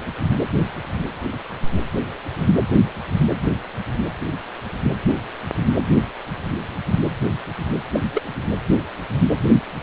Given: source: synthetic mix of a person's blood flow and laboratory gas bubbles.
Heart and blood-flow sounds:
Doppler ultrasound of blood flow; precordium
7.92-8.00 s: bubbles
8.14-8.23 s: bubbles
From the record:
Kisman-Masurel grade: 122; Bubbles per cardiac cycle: 1 to 2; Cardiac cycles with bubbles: 10 to 50%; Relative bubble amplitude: moderate (0.250 to 0.450); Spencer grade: 2 (many but less than half of the cardiac periods contain bubble signals, singularly or in groups); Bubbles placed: anywhere in the cardiac cycle

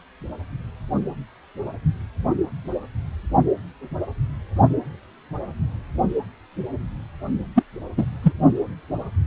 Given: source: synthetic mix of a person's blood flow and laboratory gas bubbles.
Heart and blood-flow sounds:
Doppler ultrasound of blood flow; precordium
7.55-7.62 s: bubbles
7.96-8.05 s: bubbles
8.23-8.33 s: bubbles
From the record:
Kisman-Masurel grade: 213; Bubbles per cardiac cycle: several, 3 to 8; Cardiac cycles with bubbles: 1 to 10%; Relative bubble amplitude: loud (0.450 to 0.775); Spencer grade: 1 (occasional bubble signal discernible with the cardiac motion signal, with majority of cardiac periods free of bubbles); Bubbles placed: only in the low amplitude regions of the cardiac cycle

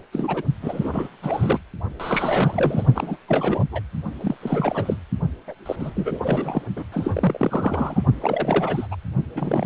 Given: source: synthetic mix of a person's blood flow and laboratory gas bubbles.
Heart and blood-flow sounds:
Doppler ultrasound of blood flow; precordium
0.13-0.41 s: bubbles
0.62-1.08 s: bubbles
1.23-1.60 s: bubbles
2.00-2.86 s: bubbles
2.95-3.17 s: bubbles
3.28-3.65 s: bubbles
3.71-3.81 s: bubbles
4.21-4.35 s: bubbles
4.41-4.96 s: bubbles
5.47-5.55 s: bubbles
5.65-6.61 s: bubbles
6.76-6.85 s: bubbles
6.92-8.04 s: bubbles
8.21-8.87 s: bubbles
8.91-8.96 s: bubbles
9.34-9.66 s: bubbles
From the record:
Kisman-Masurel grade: 342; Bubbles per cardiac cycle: rolling drumbeat, 9 or more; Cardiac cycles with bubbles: 100%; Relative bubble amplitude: moderate (0.250 to 0.450); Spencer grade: 3 (all of the cardiac periods contain showers or single bubble signals, but not dominating or overriding the cardiac motion signals); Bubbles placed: only in the low amplitude regions of the cardiac cycle

